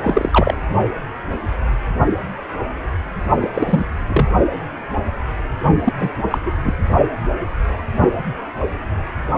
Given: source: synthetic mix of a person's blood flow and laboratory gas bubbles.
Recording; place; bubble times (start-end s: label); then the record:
Doppler ultrasound of blood flow; precordium
0.04-0.57 s: bubbles
3.41-3.48 s: bubbles
3.54-3.86 s: bubbles
4.09-4.26 s: bubbles
5.85-5.92 s: bubbles
5.99-6.11 s: bubbles
6.30-6.38 s: bubbles
6.45-6.52 s: bubbles
6.64-6.75 s: bubbles
From the record:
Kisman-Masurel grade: 233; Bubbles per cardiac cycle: several, 3 to 8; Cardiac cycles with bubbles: 50 to 99%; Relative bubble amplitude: loud (0.450 to 0.775); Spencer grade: 3 (all of the cardiac periods contain showers or single bubble signals, but not dominating or overriding the cardiac motion signals); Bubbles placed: only in the low amplitude regions of the cardiac cycle